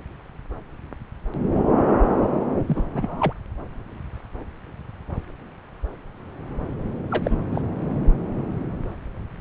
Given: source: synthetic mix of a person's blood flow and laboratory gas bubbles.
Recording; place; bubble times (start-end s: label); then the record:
Doppler ultrasound of blood flow; subclavian vein
2.67-2.83 s: bubbles
2.89-3.33 s: bubbles
7.11-7.36 s: bubbles
7.51-7.61 s: bubbles
From the record:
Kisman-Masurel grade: 212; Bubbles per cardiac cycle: several, 3 to 8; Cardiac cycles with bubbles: 1 to 10%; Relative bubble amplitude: moderate (0.250 to 0.450); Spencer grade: 1 (occasional bubble signal discernible with the cardiac motion signal, with majority of cardiac periods free of bubbles); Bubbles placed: anywhere in the cardiac cycle